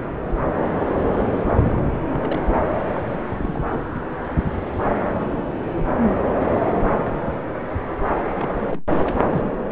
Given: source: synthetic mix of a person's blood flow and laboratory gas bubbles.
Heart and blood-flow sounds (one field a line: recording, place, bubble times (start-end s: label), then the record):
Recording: Doppler ultrasound of blood flow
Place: subclavian vein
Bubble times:
0.00-0.11 s: bubbles
1.47-1.86 s: bubbles
1.91-1.99 s: bubbles
2.10-2.44 s: bubbles
2.92-4.05 s: bubbles
8.38-8.62 s: bubbles
8.71-8.85 s: bubbles
8.92-9.21 s: bubbles
9.29-9.50 s: bubbles
9.64-9.72 s: bubbles
From the record:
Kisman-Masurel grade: 221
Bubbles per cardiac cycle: several, 3 to 8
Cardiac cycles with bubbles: 10 to 50%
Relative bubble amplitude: barely perceptible (0.100 to 0.250)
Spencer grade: 2 (many but less than half of the cardiac periods contain bubble signals, singularly or in groups)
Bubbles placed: anywhere in the cardiac cycle